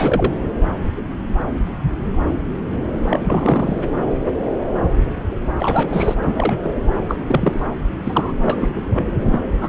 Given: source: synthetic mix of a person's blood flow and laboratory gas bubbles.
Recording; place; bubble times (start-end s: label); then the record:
Doppler ultrasound of blood flow; subclavian vein
0.00-0.33 s: bubbles
3.08-3.20 s: bubbles
3.24-3.83 s: bubbles
5.57-6.16 s: bubbles
6.21-6.61 s: bubbles
6.63-6.75 s: bubbles
7.08-7.17 s: bubbles
7.27-7.59 s: bubbles
8.04-8.34 s: bubbles
8.42-8.69 s: bubbles
8.76-8.81 s: bubbles
8.93-9.09 s: bubbles
9.24-9.40 s: bubbles
9.61-9.69 s: bubbles
From the record:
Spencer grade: 3 (all of the cardiac periods contain showers or single bubble signals, but not dominating or overriding the cardiac motion signals); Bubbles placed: anywhere in the cardiac cycle